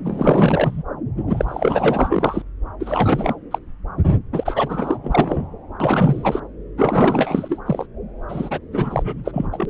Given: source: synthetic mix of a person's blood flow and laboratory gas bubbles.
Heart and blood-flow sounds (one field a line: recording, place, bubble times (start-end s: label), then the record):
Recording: Doppler ultrasound of blood flow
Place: subclavian vein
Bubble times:
0.04-0.82 s: bubbles
1.16-1.23 s: bubbles
1.27-1.45 s: bubbles
1.48-2.42 s: bubbles
2.79-3.35 s: bubbles
3.50-3.58 s: bubbles
4.05-4.15 s: bubbles
4.32-4.99 s: bubbles
5.04-5.46 s: bubbles
5.80-6.40 s: bubbles
6.78-7.60 s: bubbles
7.66-7.86 s: bubbles
8.29-8.59 s: bubbles
8.71-9.48 s: bubbles
9.52-9.70 s: bubbles
From the record:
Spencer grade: 4 (maximum detectable bubble signal sounding continuously throughout systole and diastole of every cardiac period, and overriding the amplitude of the normal cardiac signals)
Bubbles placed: anywhere in the cardiac cycle